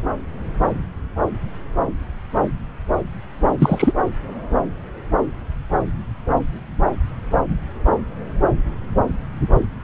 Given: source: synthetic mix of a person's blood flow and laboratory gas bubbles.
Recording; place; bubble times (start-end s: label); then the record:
Doppler ultrasound of blood flow; subclavian vein
3.58-3.93 s: bubbles
From the record:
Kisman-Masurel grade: 213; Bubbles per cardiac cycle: several, 3 to 8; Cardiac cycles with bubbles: 1 to 10%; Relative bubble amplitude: loud (0.450 to 0.775); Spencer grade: 1 (occasional bubble signal discernible with the cardiac motion signal, with majority of cardiac periods free of bubbles); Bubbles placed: anywhere in the cardiac cycle